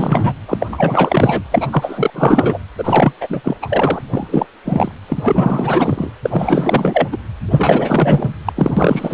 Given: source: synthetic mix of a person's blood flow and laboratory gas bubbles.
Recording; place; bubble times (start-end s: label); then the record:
Doppler ultrasound of blood flow; precordium
0.00-0.35 s: bubbles
0.48-0.68 s: bubbles
0.72-1.45 s: bubbles
1.51-1.68 s: bubbles
1.70-2.10 s: bubbles
2.13-2.58 s: bubbles
2.78-3.12 s: bubbles
3.20-3.57 s: bubbles
3.62-4.07 s: bubbles
4.14-4.46 s: bubbles
4.65-4.92 s: bubbles
5.08-6.10 s: bubbles
6.23-7.08 s: bubbles
7.12-7.17 s: bubbles
7.50-8.30 s: bubbles
8.45-8.53 s: bubbles
8.55-9.14 s: bubbles
From the record:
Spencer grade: 4 (maximum detectable bubble signal sounding continuously throughout systole and diastole of every cardiac period, and overriding the amplitude of the normal cardiac signals); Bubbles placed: anywhere in the cardiac cycle